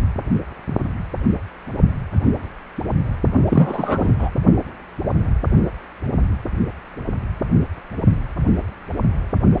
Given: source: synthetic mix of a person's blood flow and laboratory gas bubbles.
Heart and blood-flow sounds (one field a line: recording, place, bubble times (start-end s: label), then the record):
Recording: Doppler ultrasound of blood flow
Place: precordium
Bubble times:
3.49-4.14 s: bubbles
4.19-4.30 s: bubbles
From the record:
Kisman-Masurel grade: 223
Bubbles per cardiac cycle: several, 3 to 8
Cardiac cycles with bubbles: 10 to 50%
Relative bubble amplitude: loud (0.450 to 0.775)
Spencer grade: 2 (many but less than half of the cardiac periods contain bubble signals, singularly or in groups)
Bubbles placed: only in the low amplitude regions of the cardiac cycle